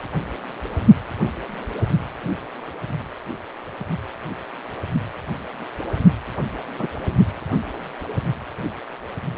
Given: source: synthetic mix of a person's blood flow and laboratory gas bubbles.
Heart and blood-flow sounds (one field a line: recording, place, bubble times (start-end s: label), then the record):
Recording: Doppler ultrasound of blood flow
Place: precordium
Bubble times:
6.79-6.87 s: bubbles
From the record:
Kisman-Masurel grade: 123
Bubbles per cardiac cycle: 1 to 2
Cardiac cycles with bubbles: 10 to 50%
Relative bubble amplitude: loud (0.450 to 0.775)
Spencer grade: 2 (many but less than half of the cardiac periods contain bubble signals, singularly or in groups)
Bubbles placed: only in the low amplitude regions of the cardiac cycle